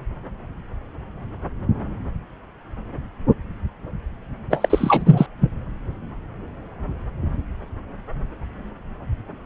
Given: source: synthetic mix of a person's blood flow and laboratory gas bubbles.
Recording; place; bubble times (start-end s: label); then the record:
Doppler ultrasound of blood flow; subclavian vein
4.50-5.26 s: bubbles
5.40-5.50 s: bubbles
From the record:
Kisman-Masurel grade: 213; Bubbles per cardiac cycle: several, 3 to 8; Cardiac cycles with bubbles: 1 to 10%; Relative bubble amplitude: loud (0.450 to 0.775); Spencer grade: 1 (occasional bubble signal discernible with the cardiac motion signal, with majority of cardiac periods free of bubbles); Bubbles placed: anywhere in the cardiac cycle